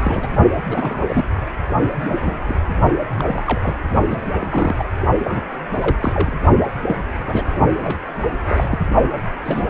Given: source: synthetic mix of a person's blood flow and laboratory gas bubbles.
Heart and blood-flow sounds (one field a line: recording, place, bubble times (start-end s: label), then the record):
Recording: Doppler ultrasound of blood flow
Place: precordium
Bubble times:
0.00-0.36 s: bubbles
0.69-1.25 s: bubbles
1.95-2.60 s: bubbles
3.17-3.25 s: bubbles
3.27-3.43 s: bubbles
3.46-3.75 s: bubbles
4.09-4.19 s: bubbles
4.39-4.85 s: bubbles
5.19-5.42 s: bubbles
5.81-6.33 s: bubbles
6.88-6.94 s: bubbles
7.26-7.44 s: bubbles
7.83-7.98 s: bubbles
8.46-8.79 s: bubbles
9.45-9.70 s: bubbles
From the record:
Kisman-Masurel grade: 242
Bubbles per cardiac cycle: several, 3 to 8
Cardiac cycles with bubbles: 100%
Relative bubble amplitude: moderate (0.250 to 0.450)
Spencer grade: 3 (all of the cardiac periods contain showers or single bubble signals, but not dominating or overriding the cardiac motion signals)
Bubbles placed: only in the low amplitude regions of the cardiac cycle